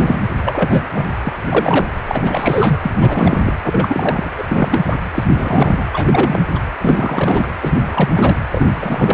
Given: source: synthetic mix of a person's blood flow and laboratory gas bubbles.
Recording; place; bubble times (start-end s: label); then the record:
Doppler ultrasound of blood flow; precordium
0.00-0.19 s: bubbles
0.44-0.88 s: bubbles
0.94-1.07 s: bubbles
1.23-1.33 s: bubbles
1.41-1.43 s: bubbles
1.49-1.86 s: bubbles
2.06-2.78 s: bubbles
2.82-3.52 s: bubbles
3.64-4.29 s: bubbles
4.37-4.44 s: bubbles
4.49-4.83 s: bubbles
4.87-4.98 s: bubbles
5.14-5.25 s: bubbles
5.29-5.87 s: bubbles
5.93-6.43 s: bubbles
6.55-6.60 s: bubbles
6.81-7.52 s: bubbles
7.62-8.09 s: bubbles
8.12-8.37 s: bubbles
8.52-8.66 s: bubbles
8.80-9.14 s: bubbles
From the record:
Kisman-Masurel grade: 342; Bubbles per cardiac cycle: rolling drumbeat, 9 or more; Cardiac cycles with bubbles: 100%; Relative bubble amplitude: moderate (0.250 to 0.450); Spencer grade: 3 (all of the cardiac periods contain showers or single bubble signals, but not dominating or overriding the cardiac motion signals); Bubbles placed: anywhere in the cardiac cycle